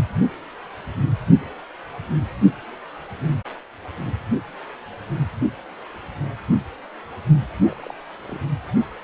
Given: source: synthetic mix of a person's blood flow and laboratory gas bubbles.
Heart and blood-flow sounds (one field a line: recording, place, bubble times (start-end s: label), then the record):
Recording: Doppler ultrasound of blood flow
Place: precordium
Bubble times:
7.65-7.93 s: bubbles
8.26-8.40 s: bubbles
From the record:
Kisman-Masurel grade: 221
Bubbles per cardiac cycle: several, 3 to 8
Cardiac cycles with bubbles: 10 to 50%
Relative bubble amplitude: barely perceptible (0.100 to 0.250)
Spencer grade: 2 (many but less than half of the cardiac periods contain bubble signals, singularly or in groups)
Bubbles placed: anywhere in the cardiac cycle